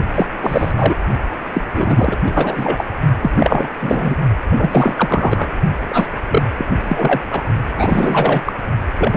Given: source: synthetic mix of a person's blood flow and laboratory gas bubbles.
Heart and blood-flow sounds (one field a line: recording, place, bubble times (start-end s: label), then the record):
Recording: Doppler ultrasound of blood flow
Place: precordium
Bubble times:
0.15-0.27 s: bubbles
0.42-0.72 s: bubbles
0.76-0.94 s: bubbles
1.53-1.62 s: bubbles
1.73-2.17 s: bubbles
2.24-2.84 s: bubbles
3.21-3.31 s: bubbles
3.35-3.69 s: bubbles
3.81-4.15 s: bubbles
4.49-5.54 s: bubbles
5.90-6.08 s: bubbles
6.29-6.42 s: bubbles
6.57-6.67 s: bubbles
6.83-7.21 s: bubbles
7.32-7.43 s: bubbles
7.77-8.41 s: bubbles
8.45-8.52 s: bubbles
8.98-9.17 s: bubbles
From the record:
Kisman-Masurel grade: 343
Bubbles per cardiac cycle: rolling drumbeat, 9 or more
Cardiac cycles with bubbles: 100%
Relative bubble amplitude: loud (0.450 to 0.775)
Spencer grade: 3 (all of the cardiac periods contain showers or single bubble signals, but not dominating or overriding the cardiac motion signals)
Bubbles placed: only in the low amplitude regions of the cardiac cycle